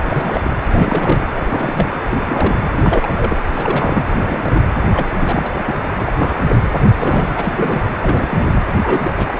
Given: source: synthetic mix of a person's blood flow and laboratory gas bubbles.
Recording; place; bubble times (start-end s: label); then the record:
Doppler ultrasound of blood flow; precordium
0.06-0.41 s: bubbles
0.43-0.54 s: bubbles
0.71-1.26 s: bubbles
1.35-1.99 s: bubbles
2.10-2.60 s: bubbles
2.76-3.37 s: bubbles
3.54-4.69 s: bubbles
4.92-5.12 s: bubbles
5.19-5.52 s: bubbles
5.66-5.75 s: bubbles
5.96-6.12 s: bubbles
6.18-6.68 s: bubbles
6.94-7.29 s: bubbles
7.36-7.86 s: bubbles
8.02-8.52 s: bubbles
8.83-9.34 s: bubbles
From the record:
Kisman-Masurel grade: 342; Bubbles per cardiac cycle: rolling drumbeat, 9 or more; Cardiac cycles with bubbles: 100%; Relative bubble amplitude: moderate (0.250 to 0.450); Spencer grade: 3 (all of the cardiac periods contain showers or single bubble signals, but not dominating or overriding the cardiac motion signals); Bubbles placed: anywhere in the cardiac cycle